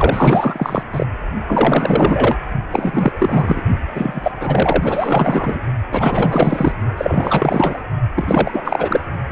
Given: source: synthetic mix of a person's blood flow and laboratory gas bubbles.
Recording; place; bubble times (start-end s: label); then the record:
Doppler ultrasound of blood flow; precordium
0.00-0.83 s: bubbles
0.93-1.06 s: bubbles
1.48-2.37 s: bubbles
2.71-3.62 s: bubbles
3.94-4.32 s: bubbles
4.40-5.59 s: bubbles
5.91-6.72 s: bubbles
6.97-7.83 s: bubbles
8.16-9.00 s: bubbles
9.28-9.32 s: bubbles
From the record:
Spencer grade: 4 (maximum detectable bubble signal sounding continuously throughout systole and diastole of every cardiac period, and overriding the amplitude of the normal cardiac signals); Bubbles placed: only in the low amplitude regions of the cardiac cycle